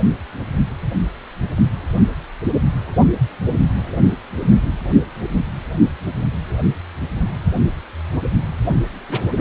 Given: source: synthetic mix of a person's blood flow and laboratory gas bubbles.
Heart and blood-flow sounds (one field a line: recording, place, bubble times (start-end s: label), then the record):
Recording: Doppler ultrasound of blood flow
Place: precordium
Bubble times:
9.09-9.19 s: bubbles
9.35-9.41 s: bubbles
From the record:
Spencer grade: 1 (occasional bubble signal discernible with the cardiac motion signal, with majority of cardiac periods free of bubbles)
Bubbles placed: only in the low amplitude regions of the cardiac cycle